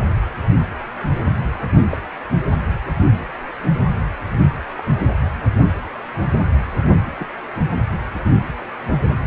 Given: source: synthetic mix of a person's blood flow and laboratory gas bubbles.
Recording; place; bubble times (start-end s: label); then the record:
Doppler ultrasound of blood flow; precordium
1.91-1.97 s: bubbles
2.29-2.38 s: bubbles
4.77-4.83 s: bubbles
7.11-7.29 s: bubbles
From the record:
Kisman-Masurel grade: 121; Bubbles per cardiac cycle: 1 to 2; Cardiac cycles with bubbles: 10 to 50%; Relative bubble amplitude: barely perceptible (0.100 to 0.250); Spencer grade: 2 (many but less than half of the cardiac periods contain bubble signals, singularly or in groups); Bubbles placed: anywhere in the cardiac cycle